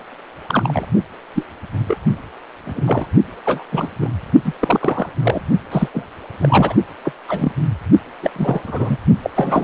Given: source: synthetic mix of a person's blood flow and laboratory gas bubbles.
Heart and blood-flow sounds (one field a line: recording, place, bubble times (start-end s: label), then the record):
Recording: Doppler ultrasound of blood flow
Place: precordium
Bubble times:
0.48-0.85 s: bubbles
1.34-1.43 s: bubbles
1.88-1.97 s: bubbles
2.65-3.07 s: bubbles
3.46-3.63 s: bubbles
3.71-3.88 s: bubbles
4.01-4.10 s: bubbles
4.45-4.53 s: bubbles
4.61-5.10 s: bubbles
5.23-5.42 s: bubbles
5.72-5.88 s: bubbles
5.94-6.07 s: bubbles
6.41-6.75 s: bubbles
7.05-7.12 s: bubbles
7.28-7.52 s: bubbles
8.22-8.30 s: bubbles
8.33-8.97 s: bubbles
9.23-9.30 s: bubbles
9.35-9.64 s: bubbles
From the record:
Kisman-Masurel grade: 242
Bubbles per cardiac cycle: several, 3 to 8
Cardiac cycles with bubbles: 100%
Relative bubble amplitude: moderate (0.250 to 0.450)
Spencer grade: 3 (all of the cardiac periods contain showers or single bubble signals, but not dominating or overriding the cardiac motion signals)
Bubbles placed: only in the low amplitude regions of the cardiac cycle